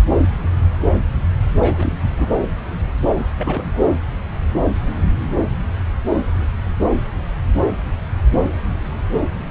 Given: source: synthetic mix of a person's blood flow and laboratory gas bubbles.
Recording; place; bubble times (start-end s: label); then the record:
Doppler ultrasound of blood flow; subclavian vein
1.55-2.32 s: bubbles
3.37-3.95 s: bubbles
From the record:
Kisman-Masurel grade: 221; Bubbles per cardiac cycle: several, 3 to 8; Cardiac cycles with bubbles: 10 to 50%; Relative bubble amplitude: barely perceptible (0.100 to 0.250); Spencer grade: 2 (many but less than half of the cardiac periods contain bubble signals, singularly or in groups); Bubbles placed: anywhere in the cardiac cycle